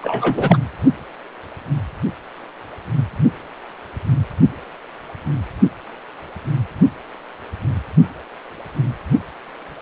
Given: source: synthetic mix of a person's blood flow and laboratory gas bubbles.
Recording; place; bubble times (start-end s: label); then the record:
Doppler ultrasound of blood flow; precordium
0.01-0.58 s: bubbles
From the record:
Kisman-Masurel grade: 213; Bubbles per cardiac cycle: several, 3 to 8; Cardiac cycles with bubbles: 1 to 10%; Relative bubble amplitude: loud (0.450 to 0.775); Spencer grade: 1 (occasional bubble signal discernible with the cardiac motion signal, with majority of cardiac periods free of bubbles); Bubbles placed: only in the low amplitude regions of the cardiac cycle